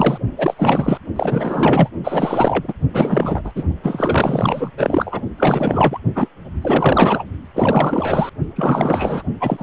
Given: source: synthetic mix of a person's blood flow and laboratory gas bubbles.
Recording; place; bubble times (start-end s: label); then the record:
Doppler ultrasound of blood flow; precordium
0.00-0.18 s: bubbles
0.36-0.98 s: bubbles
1.16-1.89 s: bubbles
2.04-2.74 s: bubbles
2.93-3.52 s: bubbles
3.55-3.64 s: bubbles
3.82-4.70 s: bubbles
4.77-5.21 s: bubbles
5.38-5.99 s: bubbles
6.15-6.29 s: bubbles
6.61-7.24 s: bubbles
7.54-8.29 s: bubbles
8.55-9.22 s: bubbles
9.40-9.63 s: bubbles
From the record:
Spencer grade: 4 (maximum detectable bubble signal sounding continuously throughout systole and diastole of every cardiac period, and overriding the amplitude of the normal cardiac signals); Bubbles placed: only in the low amplitude regions of the cardiac cycle